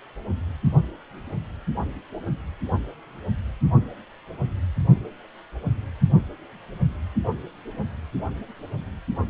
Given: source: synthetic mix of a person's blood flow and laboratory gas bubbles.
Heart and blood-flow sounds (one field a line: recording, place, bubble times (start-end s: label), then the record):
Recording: Doppler ultrasound of blood flow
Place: precordium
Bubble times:
no bubbles
From the record:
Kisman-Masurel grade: 000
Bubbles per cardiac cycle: 0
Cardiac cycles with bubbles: 0%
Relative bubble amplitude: no bubbles discernible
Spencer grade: 0 (complete lack of bubble signals)